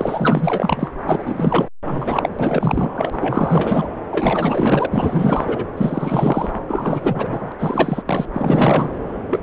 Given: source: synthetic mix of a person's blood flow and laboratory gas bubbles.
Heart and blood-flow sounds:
Doppler ultrasound of blood flow; subclavian vein
0.00-0.94 s: bubbles
1.05-1.68 s: bubbles
1.86-2.29 s: bubbles
2.38-3.88 s: bubbles
4.10-4.87 s: bubbles
4.90-5.64 s: bubbles
5.76-6.61 s: bubbles
6.67-7.52 s: bubbles
7.58-8.03 s: bubbles
8.05-8.25 s: bubbles
8.33-8.93 s: bubbles
9.30-9.42 s: bubbles
From the record:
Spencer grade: 4 (maximum detectable bubble signal sounding continuously throughout systole and diastole of every cardiac period, and overriding the amplitude of the normal cardiac signals); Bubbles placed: anywhere in the cardiac cycle

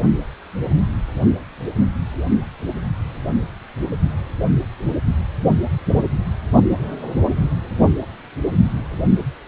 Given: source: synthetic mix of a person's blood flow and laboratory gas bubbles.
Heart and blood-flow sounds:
Doppler ultrasound of blood flow; precordium
5.87-6.04 s: bubbles
From the record:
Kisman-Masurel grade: 112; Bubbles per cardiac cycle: 1 to 2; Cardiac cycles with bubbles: 1 to 10%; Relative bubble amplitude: moderate (0.250 to 0.450); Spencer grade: 1 (occasional bubble signal discernible with the cardiac motion signal, with majority of cardiac periods free of bubbles); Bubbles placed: only in the low amplitude regions of the cardiac cycle

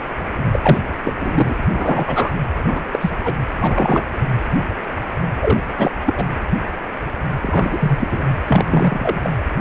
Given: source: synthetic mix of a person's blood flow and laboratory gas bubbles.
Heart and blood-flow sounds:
Doppler ultrasound of blood flow; precordium
0.52-0.77 s: bubbles
1.03-1.56 s: bubbles
1.74-2.32 s: bubbles
2.63-2.81 s: bubbles
2.92-3.10 s: bubbles
3.23-3.35 s: bubbles
3.61-4.03 s: bubbles
5.41-5.61 s: bubbles
5.77-5.91 s: bubbles
6.06-6.13 s: bubbles
6.16-6.25 s: bubbles
7.42-8.23 s: bubbles
8.45-9.31 s: bubbles
From the record:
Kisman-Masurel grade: 233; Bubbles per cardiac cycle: several, 3 to 8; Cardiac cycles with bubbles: 50 to 99%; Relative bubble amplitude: loud (0.450 to 0.775); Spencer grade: 3 (all of the cardiac periods contain showers or single bubble signals, but not dominating or overriding the cardiac motion signals); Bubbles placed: anywhere in the cardiac cycle

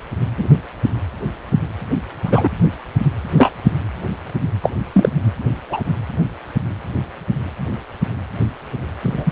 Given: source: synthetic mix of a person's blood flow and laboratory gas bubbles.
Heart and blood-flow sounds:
Doppler ultrasound of blood flow; precordium
0.37-0.48 s: bubbles
2.25-2.49 s: bubbles
3.37-3.52 s: bubbles
4.62-4.70 s: bubbles
4.92-5.09 s: bubbles
5.70-5.81 s: bubbles
9.02-9.32 s: bubbles
From the record:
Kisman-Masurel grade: 123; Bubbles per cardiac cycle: 1 to 2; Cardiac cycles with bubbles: 10 to 50%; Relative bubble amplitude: loud (0.450 to 0.775); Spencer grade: 2 (many but less than half of the cardiac periods contain bubble signals, singularly or in groups); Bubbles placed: anywhere in the cardiac cycle

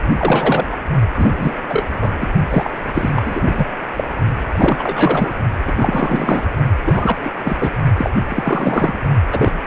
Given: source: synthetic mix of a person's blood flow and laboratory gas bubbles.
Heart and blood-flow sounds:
Doppler ultrasound of blood flow; precordium
0.17-0.67 s: bubbles
0.71-0.77 s: bubbles
1.14-1.55 s: bubbles
1.69-1.86 s: bubbles
1.90-2.15 s: bubbles
2.20-2.28 s: bubbles
2.50-2.70 s: bubbles
2.74-3.69 s: bubbles
3.96-4.04 s: bubbles
4.52-5.37 s: bubbles
5.64-5.74 s: bubbles
5.76-6.46 s: bubbles
6.86-7.17 s: bubbles
7.25-7.32 s: bubbles
7.45-7.57 s: bubbles
7.60-7.70 s: bubbles
7.97-8.10 s: bubbles
8.29-8.94 s: bubbles
9.30-9.52 s: bubbles
From the record:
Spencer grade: 3 (all of the cardiac periods contain showers or single bubble signals, but not dominating or overriding the cardiac motion signals); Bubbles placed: only in the low amplitude regions of the cardiac cycle

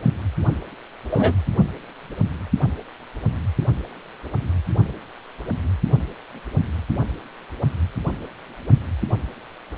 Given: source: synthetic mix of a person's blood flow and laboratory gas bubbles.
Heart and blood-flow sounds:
Doppler ultrasound of blood flow; precordium
1.10-1.33 s: bubbles
From the record:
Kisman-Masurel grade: 113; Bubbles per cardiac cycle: 1 to 2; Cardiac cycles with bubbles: 1 to 10%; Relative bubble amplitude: loud (0.450 to 0.775); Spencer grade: 1 (occasional bubble signal discernible with the cardiac motion signal, with majority of cardiac periods free of bubbles); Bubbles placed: only in the low amplitude regions of the cardiac cycle

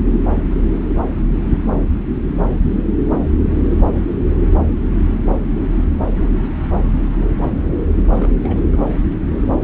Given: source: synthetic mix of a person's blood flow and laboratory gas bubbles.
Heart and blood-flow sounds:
Doppler ultrasound of blood flow; subclavian vein
8.08-8.10 s: bubbles
8.13-8.30 s: bubbles
8.43-8.67 s: bubbles
8.72-8.76 s: bubbles
From the record:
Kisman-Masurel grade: 211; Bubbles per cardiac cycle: several, 3 to 8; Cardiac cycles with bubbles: 1 to 10%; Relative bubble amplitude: barely perceptible (0.100 to 0.250); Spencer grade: 1 (occasional bubble signal discernible with the cardiac motion signal, with majority of cardiac periods free of bubbles); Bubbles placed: anywhere in the cardiac cycle

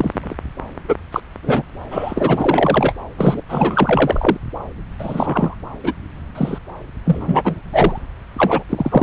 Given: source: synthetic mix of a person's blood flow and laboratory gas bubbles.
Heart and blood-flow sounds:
Doppler ultrasound of blood flow; subclavian vein
0.00-0.35 s: bubbles
0.88-0.96 s: bubbles
1.12-1.20 s: bubbles
1.43-1.63 s: bubbles
1.91-2.92 s: bubbles
3.18-3.42 s: bubbles
3.49-4.38 s: bubbles
4.99-5.55 s: bubbles
5.83-5.92 s: bubbles
6.35-6.58 s: bubbles
7.05-7.61 s: bubbles
7.73-8.00 s: bubbles
8.38-8.63 s: bubbles
8.69-9.03 s: bubbles
From the record:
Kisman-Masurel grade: 243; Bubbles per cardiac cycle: several, 3 to 8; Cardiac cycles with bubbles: 100%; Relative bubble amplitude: loud (0.450 to 0.775); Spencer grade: 3 (all of the cardiac periods contain showers or single bubble signals, but not dominating or overriding the cardiac motion signals); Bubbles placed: anywhere in the cardiac cycle

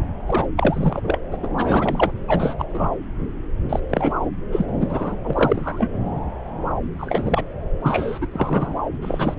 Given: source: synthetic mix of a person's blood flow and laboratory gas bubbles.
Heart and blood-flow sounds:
Doppler ultrasound of blood flow; subclavian vein
0.27-0.47 s: bubbles
0.56-1.18 s: bubbles
1.30-1.36 s: bubbles
1.43-1.49 s: bubbles
1.57-2.12 s: bubbles
2.27-2.54 s: bubbles
2.58-2.65 s: bubbles
2.74-2.91 s: bubbles
3.69-3.79 s: bubbles
3.90-4.29 s: bubbles
4.52-4.66 s: bubbles
4.79-5.16 s: bubbles
5.24-5.91 s: bubbles
6.98-7.45 s: bubbles
7.83-8.27 s: bubbles
8.33-8.75 s: bubbles
9.01-9.34 s: bubbles
From the record:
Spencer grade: 3 (all of the cardiac periods contain showers or single bubble signals, but not dominating or overriding the cardiac motion signals); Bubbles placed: anywhere in the cardiac cycle

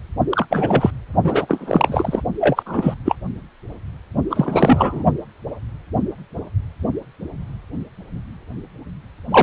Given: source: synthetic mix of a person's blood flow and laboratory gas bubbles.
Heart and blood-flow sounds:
Doppler ultrasound of blood flow; precordium
0.31-0.46 s: bubbles
0.51-0.91 s: bubbles
1.24-2.22 s: bubbles
2.40-2.63 s: bubbles
2.66-2.94 s: bubbles
3.05-3.15 s: bubbles
4.29-5.04 s: bubbles
9.30-9.43 s: bubbles
From the record:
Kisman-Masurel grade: 223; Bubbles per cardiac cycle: several, 3 to 8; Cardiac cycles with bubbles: 10 to 50%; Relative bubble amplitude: loud (0.450 to 0.775); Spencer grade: 2 (many but less than half of the cardiac periods contain bubble signals, singularly or in groups); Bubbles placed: only in the low amplitude regions of the cardiac cycle

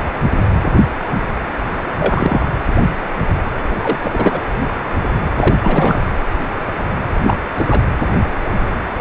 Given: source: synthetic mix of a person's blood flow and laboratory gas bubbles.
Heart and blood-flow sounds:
Doppler ultrasound of blood flow; precordium
1.99-2.48 s: bubbles
3.83-3.98 s: bubbles
4.02-4.39 s: bubbles
5.33-5.54 s: bubbles
5.61-6.02 s: bubbles
7.16-7.37 s: bubbles
7.54-7.67 s: bubbles
7.69-7.82 s: bubbles
From the record:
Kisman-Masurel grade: 223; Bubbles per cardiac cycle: several, 3 to 8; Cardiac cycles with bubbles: 10 to 50%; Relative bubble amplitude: loud (0.450 to 0.775); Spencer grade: 2 (many but less than half of the cardiac periods contain bubble signals, singularly or in groups); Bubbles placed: anywhere in the cardiac cycle

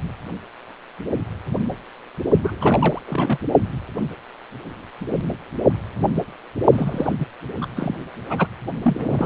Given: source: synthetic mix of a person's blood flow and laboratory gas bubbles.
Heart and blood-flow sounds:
Doppler ultrasound of blood flow; precordium
2.41-2.56 s: bubbles
2.59-3.01 s: bubbles
3.08-3.38 s: bubbles
6.72-7.12 s: bubbles
7.20-7.25 s: bubbles
7.61-7.66 s: bubbles
7.76-7.98 s: bubbles
8.29-8.47 s: bubbles
8.83-9.26 s: bubbles
From the record:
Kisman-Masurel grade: 332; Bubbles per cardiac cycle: rolling drumbeat, 9 or more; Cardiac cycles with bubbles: 50 to 99%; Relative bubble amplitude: moderate (0.250 to 0.450); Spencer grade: 3 (all of the cardiac periods contain showers or single bubble signals, but not dominating or overriding the cardiac motion signals); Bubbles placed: only in the low amplitude regions of the cardiac cycle

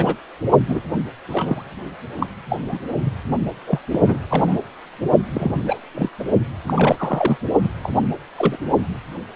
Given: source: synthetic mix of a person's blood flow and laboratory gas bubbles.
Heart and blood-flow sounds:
Doppler ultrasound of blood flow; precordium
0.00-0.15 s: bubbles
0.68-0.81 s: bubbles
1.29-1.63 s: bubbles
2.19-2.26 s: bubbles
2.49-2.62 s: bubbles
2.69-2.81 s: bubbles
3.04-3.12 s: bubbles
3.66-3.78 s: bubbles
3.92-4.00 s: bubbles
4.06-4.19 s: bubbles
4.30-4.57 s: bubbles
5.32-5.79 s: bubbles
5.94-6.10 s: bubbles
6.20-6.24 s: bubbles
6.67-6.74 s: bubbles
6.76-7.38 s: bubbles
7.62-7.70 s: bubbles
7.83-7.94 s: bubbles
8.37-8.58 s: bubbles
From the record:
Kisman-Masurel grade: 232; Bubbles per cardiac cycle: several, 3 to 8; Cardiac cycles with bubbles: 50 to 99%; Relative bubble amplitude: moderate (0.250 to 0.450); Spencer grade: 3 (all of the cardiac periods contain showers or single bubble signals, but not dominating or overriding the cardiac motion signals); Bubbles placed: only in the low amplitude regions of the cardiac cycle

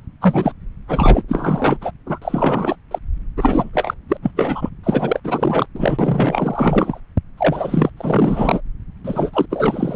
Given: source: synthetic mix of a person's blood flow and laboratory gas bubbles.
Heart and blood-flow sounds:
Doppler ultrasound of blood flow; subclavian vein
0.21-0.53 s: bubbles
0.88-1.23 s: bubbles
1.28-1.77 s: bubbles
1.81-1.92 s: bubbles
2.06-2.76 s: bubbles
2.91-2.98 s: bubbles
3.36-3.69 s: bubbles
3.73-3.94 s: bubbles
4.09-4.18 s: bubbles
4.22-4.31 s: bubbles
4.36-4.69 s: bubbles
4.83-5.20 s: bubbles
5.24-5.66 s: bubbles
5.74-7.01 s: bubbles
7.37-7.90 s: bubbles
7.97-8.62 s: bubbles
9.04-9.46 s: bubbles
9.50-9.96 s: bubbles
From the record:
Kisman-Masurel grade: 444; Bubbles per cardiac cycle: continuous sound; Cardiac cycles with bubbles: 100%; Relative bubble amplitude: maximal (0.775 to 0.999); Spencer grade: 4 (maximum detectable bubble signal sounding continuously throughout systole and diastole of every cardiac period, and overriding the amplitude of the normal cardiac signals); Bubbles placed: anywhere in the cardiac cycle

